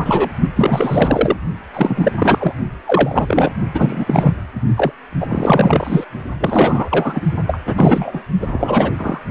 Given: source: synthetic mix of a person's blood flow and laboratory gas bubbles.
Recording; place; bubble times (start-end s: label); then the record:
Doppler ultrasound of blood flow; precordium
0.04-0.29 s: bubbles
0.56-1.36 s: bubbles
1.73-2.12 s: bubbles
2.19-2.52 s: bubbles
2.87-3.51 s: bubbles
3.73-4.35 s: bubbles
4.77-4.91 s: bubbles
5.21-6.04 s: bubbles
6.40-7.21 s: bubbles
7.47-7.60 s: bubbles
7.65-8.21 s: bubbles
8.41-8.92 s: bubbles
8.98-9.21 s: bubbles
From the record:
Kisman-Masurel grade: 343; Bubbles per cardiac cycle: rolling drumbeat, 9 or more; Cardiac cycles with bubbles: 100%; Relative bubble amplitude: loud (0.450 to 0.775); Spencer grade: 3 (all of the cardiac periods contain showers or single bubble signals, but not dominating or overriding the cardiac motion signals); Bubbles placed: only in the low amplitude regions of the cardiac cycle